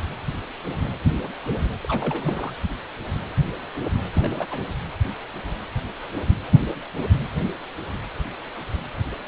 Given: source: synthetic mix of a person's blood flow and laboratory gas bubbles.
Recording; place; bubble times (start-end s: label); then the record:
Doppler ultrasound of blood flow; precordium
1.83-1.85 s: bubbles
1.88-2.53 s: bubbles
4.13-4.47 s: bubbles
4.51-4.62 s: bubbles
From the record:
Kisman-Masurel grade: 221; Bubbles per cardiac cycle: several, 3 to 8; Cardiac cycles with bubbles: 10 to 50%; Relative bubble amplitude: barely perceptible (0.100 to 0.250); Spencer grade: 2 (many but less than half of the cardiac periods contain bubble signals, singularly or in groups); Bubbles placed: anywhere in the cardiac cycle